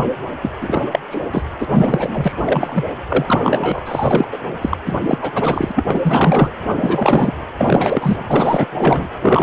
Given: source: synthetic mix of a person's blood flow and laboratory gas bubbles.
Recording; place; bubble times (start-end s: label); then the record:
Doppler ultrasound of blood flow; precordium
0.42-0.52 s: bubbles
0.60-0.99 s: bubbles
1.11-1.20 s: bubbles
1.31-1.43 s: bubbles
1.60-1.65 s: bubbles
1.70-2.33 s: bubbles
2.37-2.84 s: bubbles
3.08-3.83 s: bubbles
3.86-4.26 s: bubbles
4.32-4.38 s: bubbles
4.61-4.78 s: bubbles
4.86-4.97 s: bubbles
5.00-5.18 s: bubbles
5.21-5.31 s: bubbles
5.34-5.71 s: bubbles
5.75-5.84 s: bubbles
5.87-6.50 s: bubbles
6.68-7.37 s: bubbles
7.57-8.23 s: bubbles
8.27-8.66 s: bubbles
8.77-9.07 s: bubbles
9.21-9.43 s: bubbles
From the record:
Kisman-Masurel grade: 444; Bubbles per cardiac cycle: continuous sound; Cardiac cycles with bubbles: 100%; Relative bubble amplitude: maximal (0.775 to 0.999); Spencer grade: 4 (maximum detectable bubble signal sounding continuously throughout systole and diastole of every cardiac period, and overriding the amplitude of the normal cardiac signals); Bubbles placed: anywhere in the cardiac cycle